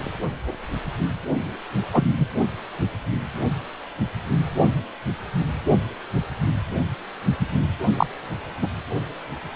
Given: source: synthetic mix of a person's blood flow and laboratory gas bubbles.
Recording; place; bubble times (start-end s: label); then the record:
Doppler ultrasound of blood flow; precordium
1.93-2.05 s: bubbles
2.20-2.27 s: bubbles
7.96-8.06 s: bubbles
8.62-8.67 s: bubbles
From the record:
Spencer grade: 2 (many but less than half of the cardiac periods contain bubble signals, singularly or in groups); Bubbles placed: only in the low amplitude regions of the cardiac cycle